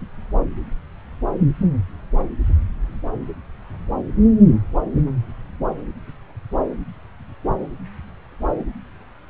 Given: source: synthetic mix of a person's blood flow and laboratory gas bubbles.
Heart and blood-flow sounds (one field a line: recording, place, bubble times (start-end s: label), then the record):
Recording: Doppler ultrasound of blood flow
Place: subclavian vein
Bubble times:
no bubbles
From the record:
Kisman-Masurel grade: 000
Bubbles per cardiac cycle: 0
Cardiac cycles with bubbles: 0%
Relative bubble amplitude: no bubbles discernible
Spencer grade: 0 (complete lack of bubble signals)